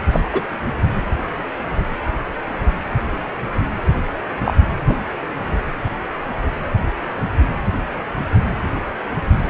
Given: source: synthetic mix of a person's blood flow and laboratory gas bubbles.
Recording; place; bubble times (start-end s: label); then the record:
Doppler ultrasound of blood flow; precordium
0.10-0.21 s: bubbles
0.33-0.41 s: bubbles
4.44-4.55 s: bubbles
4.88-4.95 s: bubbles
From the record:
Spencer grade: 2 (many but less than half of the cardiac periods contain bubble signals, singularly or in groups); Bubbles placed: anywhere in the cardiac cycle